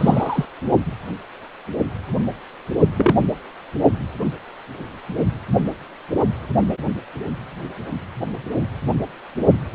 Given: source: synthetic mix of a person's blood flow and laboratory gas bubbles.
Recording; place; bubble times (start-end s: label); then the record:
Doppler ultrasound of blood flow; precordium
0.00-0.45 s: bubbles
2.96-3.15 s: bubbles
From the record:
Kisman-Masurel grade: 123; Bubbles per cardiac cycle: 1 to 2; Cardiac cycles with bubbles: 10 to 50%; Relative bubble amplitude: loud (0.450 to 0.775); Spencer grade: 2 (many but less than half of the cardiac periods contain bubble signals, singularly or in groups); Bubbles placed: only in the low amplitude regions of the cardiac cycle